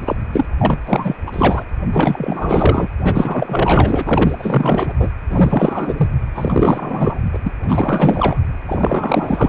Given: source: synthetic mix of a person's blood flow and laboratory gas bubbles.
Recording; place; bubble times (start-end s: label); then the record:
Doppler ultrasound of blood flow; precordium
0.05-0.16 s: bubbles
0.32-0.46 s: bubbles
0.58-0.79 s: bubbles
0.87-1.16 s: bubbles
1.26-1.64 s: bubbles
1.92-2.88 s: bubbles
2.98-4.93 s: bubbles
4.99-5.10 s: bubbles
5.29-6.09 s: bubbles
6.34-7.19 s: bubbles
7.32-7.38 s: bubbles
7.44-7.53 s: bubbles
7.63-8.40 s: bubbles
8.67-9.49 s: bubbles
From the record:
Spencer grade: 4 (maximum detectable bubble signal sounding continuously throughout systole and diastole of every cardiac period, and overriding the amplitude of the normal cardiac signals); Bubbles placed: anywhere in the cardiac cycle